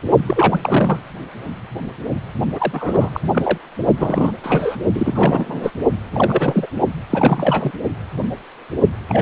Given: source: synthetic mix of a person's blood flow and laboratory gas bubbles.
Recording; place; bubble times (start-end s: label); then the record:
Doppler ultrasound of blood flow; precordium
0.27-0.99 s: bubbles
2.55-3.10 s: bubbles
3.12-3.21 s: bubbles
3.31-3.58 s: bubbles
3.98-4.32 s: bubbles
4.43-4.76 s: bubbles
4.94-5.71 s: bubbles
6.12-6.67 s: bubbles
7.10-7.71 s: bubbles
9.08-9.22 s: bubbles
From the record:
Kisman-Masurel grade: 332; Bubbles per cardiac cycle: rolling drumbeat, 9 or more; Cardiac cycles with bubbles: 50 to 99%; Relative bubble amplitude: moderate (0.250 to 0.450); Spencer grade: 3 (all of the cardiac periods contain showers or single bubble signals, but not dominating or overriding the cardiac motion signals); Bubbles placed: only in the low amplitude regions of the cardiac cycle